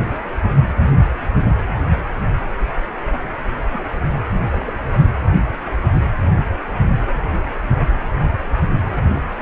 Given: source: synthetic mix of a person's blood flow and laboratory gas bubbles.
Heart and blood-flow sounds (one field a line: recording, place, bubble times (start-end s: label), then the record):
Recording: Doppler ultrasound of blood flow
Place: precordium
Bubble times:
3.71-3.79 s: bubbles
4.52-4.73 s: bubbles
From the record:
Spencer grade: 2 (many but less than half of the cardiac periods contain bubble signals, singularly or in groups)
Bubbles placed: anywhere in the cardiac cycle